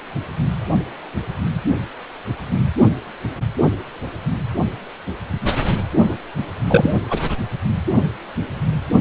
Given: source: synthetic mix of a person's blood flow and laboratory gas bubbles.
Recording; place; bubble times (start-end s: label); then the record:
Doppler ultrasound of blood flow; precordium
6.68-6.97 s: bubbles
7.09-7.20 s: bubbles
From the record:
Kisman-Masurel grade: 213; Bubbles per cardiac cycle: several, 3 to 8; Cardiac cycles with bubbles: 1 to 10%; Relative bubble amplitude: loud (0.450 to 0.775); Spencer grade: 1 (occasional bubble signal discernible with the cardiac motion signal, with majority of cardiac periods free of bubbles); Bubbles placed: anywhere in the cardiac cycle